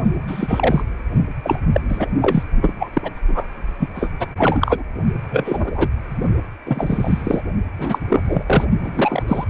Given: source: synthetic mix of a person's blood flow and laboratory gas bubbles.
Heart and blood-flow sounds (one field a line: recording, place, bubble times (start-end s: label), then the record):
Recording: Doppler ultrasound of blood flow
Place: precordium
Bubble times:
0.27-0.83 s: bubbles
1.43-1.59 s: bubbles
1.73-1.81 s: bubbles
1.88-2.06 s: bubbles
2.21-2.43 s: bubbles
2.61-2.73 s: bubbles
2.79-2.90 s: bubbles
2.94-3.10 s: bubbles
3.27-3.48 s: bubbles
3.79-3.88 s: bubbles
3.95-4.10 s: bubbles
4.19-4.27 s: bubbles
4.38-4.83 s: bubbles
5.30-5.88 s: bubbles
6.66-7.41 s: bubbles
7.77-7.99 s: bubbles
8.09-8.43 s: bubbles
8.46-8.66 s: bubbles
8.84-9.23 s: bubbles
9.28-9.45 s: bubbles
From the record:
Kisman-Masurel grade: 243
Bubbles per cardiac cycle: several, 3 to 8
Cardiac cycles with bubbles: 100%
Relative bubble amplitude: loud (0.450 to 0.775)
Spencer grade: 3 (all of the cardiac periods contain showers or single bubble signals, but not dominating or overriding the cardiac motion signals)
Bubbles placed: only in the low amplitude regions of the cardiac cycle